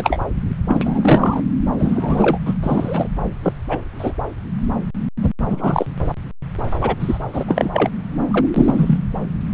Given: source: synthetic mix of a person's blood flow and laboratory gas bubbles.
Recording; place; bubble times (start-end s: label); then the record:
Doppler ultrasound of blood flow; subclavian vein
0.00-0.19 s: bubbles
0.68-1.43 s: bubbles
1.79-2.39 s: bubbles
2.46-2.54 s: bubbles
2.62-3.08 s: bubbles
3.43-3.53 s: bubbles
3.68-3.84 s: bubbles
3.99-4.14 s: bubbles
5.21-5.31 s: bubbles
5.50-5.86 s: bubbles
6.82-6.95 s: bubbles
7.00-7.18 s: bubbles
7.33-7.69 s: bubbles
7.72-7.89 s: bubbles
8.30-8.46 s: bubbles
8.54-8.98 s: bubbles
From the record:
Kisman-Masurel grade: 233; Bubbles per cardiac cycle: several, 3 to 8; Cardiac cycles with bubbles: 50 to 99%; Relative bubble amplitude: loud (0.450 to 0.775); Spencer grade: 3 (all of the cardiac periods contain showers or single bubble signals, but not dominating or overriding the cardiac motion signals); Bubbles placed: anywhere in the cardiac cycle